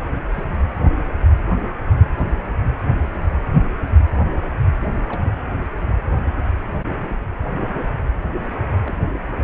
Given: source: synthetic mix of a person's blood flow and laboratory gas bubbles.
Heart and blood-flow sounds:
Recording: Doppler ultrasound of blood flow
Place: precordium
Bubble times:
0.34-0.44 s: bubbles
5.09-5.31 s: bubbles
8.85-8.96 s: bubbles
From the record:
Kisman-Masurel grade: 121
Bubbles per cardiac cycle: 1 to 2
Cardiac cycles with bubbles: 10 to 50%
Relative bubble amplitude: barely perceptible (0.100 to 0.250)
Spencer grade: 2 (many but less than half of the cardiac periods contain bubble signals, singularly or in groups)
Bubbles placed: anywhere in the cardiac cycle

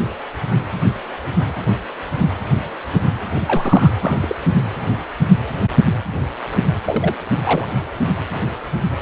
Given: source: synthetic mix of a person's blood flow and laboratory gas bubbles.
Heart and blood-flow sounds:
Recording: Doppler ultrasound of blood flow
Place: precordium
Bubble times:
3.35-3.94 s: bubbles
4.00-4.35 s: bubbles
6.85-7.15 s: bubbles
7.44-7.67 s: bubbles
From the record:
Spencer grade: 2 (many but less than half of the cardiac periods contain bubble signals, singularly or in groups)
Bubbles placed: anywhere in the cardiac cycle

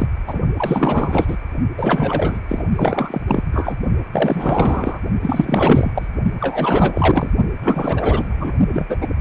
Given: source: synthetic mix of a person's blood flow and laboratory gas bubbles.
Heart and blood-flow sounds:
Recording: Doppler ultrasound of blood flow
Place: precordium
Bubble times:
0.00-0.07 s: bubbles
0.27-0.40 s: bubbles
0.57-1.37 s: bubbles
1.77-2.40 s: bubbles
2.48-2.64 s: bubbles
2.75-3.21 s: bubbles
3.27-3.44 s: bubbles
3.52-3.76 s: bubbles
4.12-5.00 s: bubbles
5.22-5.92 s: bubbles
5.95-6.07 s: bubbles
6.39-7.30 s: bubbles
7.62-8.53 s: bubbles
8.71-8.97 s: bubbles
9.00-9.07 s: bubbles
From the record:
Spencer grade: 4 (maximum detectable bubble signal sounding continuously throughout systole and diastole of every cardiac period, and overriding the amplitude of the normal cardiac signals)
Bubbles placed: only in the low amplitude regions of the cardiac cycle

